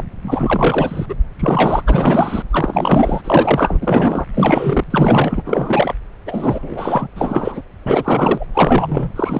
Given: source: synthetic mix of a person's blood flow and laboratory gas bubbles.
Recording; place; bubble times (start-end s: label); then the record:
Doppler ultrasound of blood flow; subclavian vein
0.00-0.04 s: bubbles
0.22-1.06 s: bubbles
1.08-1.15 s: bubbles
1.39-1.82 s: bubbles
1.86-2.43 s: bubbles
2.50-3.77 s: bubbles
3.81-4.25 s: bubbles
4.33-4.84 s: bubbles
4.90-5.42 s: bubbles
5.45-5.94 s: bubbles
6.25-7.07 s: bubbles
7.16-7.62 s: bubbles
7.85-8.45 s: bubbles
8.54-9.09 s: bubbles
9.15-9.39 s: bubbles
From the record:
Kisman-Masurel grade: 343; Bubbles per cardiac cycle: rolling drumbeat, 9 or more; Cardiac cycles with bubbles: 100%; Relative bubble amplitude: loud (0.450 to 0.775); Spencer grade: 3 (all of the cardiac periods contain showers or single bubble signals, but not dominating or overriding the cardiac motion signals); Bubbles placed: anywhere in the cardiac cycle